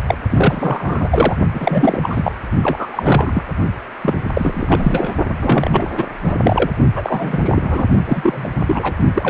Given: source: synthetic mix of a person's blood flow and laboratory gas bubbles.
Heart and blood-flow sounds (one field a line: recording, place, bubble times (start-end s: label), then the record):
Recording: Doppler ultrasound of blood flow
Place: precordium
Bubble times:
0.00-0.02 s: bubbles
0.07-0.15 s: bubbles
0.30-1.36 s: bubbles
1.54-2.32 s: bubbles
2.62-3.44 s: bubbles
4.02-4.21 s: bubbles
4.34-5.15 s: bubbles
5.37-5.90 s: bubbles
5.97-6.06 s: bubbles
6.23-6.35 s: bubbles
6.42-6.71 s: bubbles
6.95-7.87 s: bubbles
8.06-8.48 s: bubbles
8.67-8.94 s: bubbles
9.14-9.30 s: bubbles
From the record:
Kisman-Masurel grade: 343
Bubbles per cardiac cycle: rolling drumbeat, 9 or more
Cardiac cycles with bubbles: 100%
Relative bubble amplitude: loud (0.450 to 0.775)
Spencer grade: 3 (all of the cardiac periods contain showers or single bubble signals, but not dominating or overriding the cardiac motion signals)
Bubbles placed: only in the low amplitude regions of the cardiac cycle